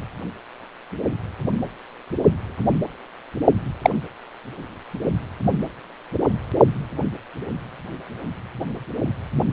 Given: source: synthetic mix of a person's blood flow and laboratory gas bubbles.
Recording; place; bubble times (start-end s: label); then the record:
Doppler ultrasound of blood flow; precordium
3.82-3.91 s: bubbles
From the record:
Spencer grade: 1 (occasional bubble signal discernible with the cardiac motion signal, with majority of cardiac periods free of bubbles); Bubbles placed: only in the low amplitude regions of the cardiac cycle